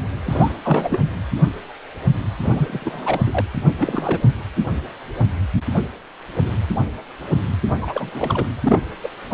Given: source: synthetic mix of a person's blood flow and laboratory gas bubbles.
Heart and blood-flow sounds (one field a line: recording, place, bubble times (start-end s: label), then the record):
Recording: Doppler ultrasound of blood flow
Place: precordium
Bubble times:
0.26-0.51 s: bubbles
0.62-1.00 s: bubbles
2.42-3.21 s: bubbles
3.26-3.46 s: bubbles
3.79-4.22 s: bubbles
7.82-8.47 s: bubbles
8.62-8.80 s: bubbles
9.03-9.09 s: bubbles
9.29-9.34 s: bubbles
From the record:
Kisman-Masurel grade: 332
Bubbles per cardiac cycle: rolling drumbeat, 9 or more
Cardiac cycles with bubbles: 50 to 99%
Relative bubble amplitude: moderate (0.250 to 0.450)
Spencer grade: 3 (all of the cardiac periods contain showers or single bubble signals, but not dominating or overriding the cardiac motion signals)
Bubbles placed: anywhere in the cardiac cycle